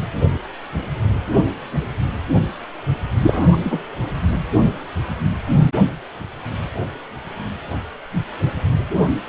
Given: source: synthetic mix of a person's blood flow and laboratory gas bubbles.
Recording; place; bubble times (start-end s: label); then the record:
Doppler ultrasound of blood flow; precordium
3.21-3.86 s: bubbles
From the record:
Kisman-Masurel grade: 213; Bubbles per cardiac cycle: several, 3 to 8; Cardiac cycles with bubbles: 1 to 10%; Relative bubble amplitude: loud (0.450 to 0.775); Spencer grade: 1 (occasional bubble signal discernible with the cardiac motion signal, with majority of cardiac periods free of bubbles); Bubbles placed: anywhere in the cardiac cycle